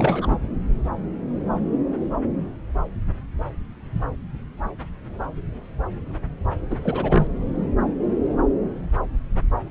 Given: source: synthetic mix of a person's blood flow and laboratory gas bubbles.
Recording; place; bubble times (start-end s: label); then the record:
Doppler ultrasound of blood flow; subclavian vein
0.00-0.38 s: bubbles
6.71-6.77 s: bubbles
6.82-7.27 s: bubbles
From the record:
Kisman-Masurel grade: 212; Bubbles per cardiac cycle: several, 3 to 8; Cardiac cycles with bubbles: 1 to 10%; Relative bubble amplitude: moderate (0.250 to 0.450); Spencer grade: 1 (occasional bubble signal discernible with the cardiac motion signal, with majority of cardiac periods free of bubbles); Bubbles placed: anywhere in the cardiac cycle